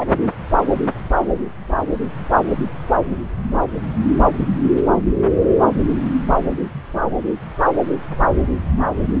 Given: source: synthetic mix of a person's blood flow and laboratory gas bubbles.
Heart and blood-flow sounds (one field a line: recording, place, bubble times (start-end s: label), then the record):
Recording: Doppler ultrasound of blood flow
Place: subclavian vein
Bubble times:
0.00-0.04 s: bubbles
From the record:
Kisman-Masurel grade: 212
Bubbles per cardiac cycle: several, 3 to 8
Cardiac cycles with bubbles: 1 to 10%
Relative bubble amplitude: moderate (0.250 to 0.450)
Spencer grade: 1 (occasional bubble signal discernible with the cardiac motion signal, with majority of cardiac periods free of bubbles)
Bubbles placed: anywhere in the cardiac cycle